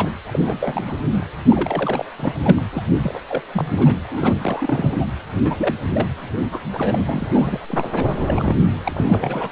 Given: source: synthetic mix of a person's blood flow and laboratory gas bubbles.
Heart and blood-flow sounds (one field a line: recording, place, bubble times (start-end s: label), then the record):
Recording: Doppler ultrasound of blood flow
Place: precordium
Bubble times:
0.00-0.10 s: bubbles
0.26-0.98 s: bubbles
1.11-1.26 s: bubbles
1.49-2.05 s: bubbles
2.18-2.62 s: bubbles
2.72-2.82 s: bubbles
3.02-3.22 s: bubbles
3.28-3.42 s: bubbles
3.54-3.98 s: bubbles
4.12-4.38 s: bubbles
4.42-5.06 s: bubbles
5.40-5.75 s: bubbles
5.83-6.13 s: bubbles
6.16-6.39 s: bubbles
6.52-6.59 s: bubbles
6.73-7.60 s: bubbles
7.69-8.06 s: bubbles
8.12-8.55 s: bubbles
8.85-9.52 s: bubbles
From the record:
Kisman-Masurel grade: 342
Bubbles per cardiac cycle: rolling drumbeat, 9 or more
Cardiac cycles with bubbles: 100%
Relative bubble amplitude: moderate (0.250 to 0.450)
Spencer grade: 3 (all of the cardiac periods contain showers or single bubble signals, but not dominating or overriding the cardiac motion signals)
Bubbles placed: anywhere in the cardiac cycle